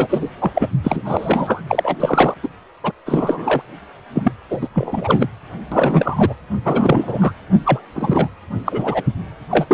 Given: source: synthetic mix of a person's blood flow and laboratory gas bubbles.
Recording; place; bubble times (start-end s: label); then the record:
Doppler ultrasound of blood flow; precordium
0.00-0.29 s: bubbles
0.39-0.51 s: bubbles
0.55-0.68 s: bubbles
0.83-1.61 s: bubbles
1.67-1.97 s: bubbles
2.00-2.34 s: bubbles
2.42-2.48 s: bubbles
2.83-2.92 s: bubbles
3.05-3.61 s: bubbles
4.14-4.32 s: bubbles
4.50-4.68 s: bubbles
4.74-5.27 s: bubbles
5.71-6.34 s: bubbles
6.64-7.32 s: bubbles
7.65-7.80 s: bubbles
7.95-8.28 s: bubbles
8.65-9.03 s: bubbles
9.51-9.66 s: bubbles
9.69-9.74 s: bubbles
From the record:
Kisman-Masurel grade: 333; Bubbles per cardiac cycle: rolling drumbeat, 9 or more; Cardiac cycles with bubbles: 50 to 99%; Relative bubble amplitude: loud (0.450 to 0.775); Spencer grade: 3 (all of the cardiac periods contain showers or single bubble signals, but not dominating or overriding the cardiac motion signals); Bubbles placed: anywhere in the cardiac cycle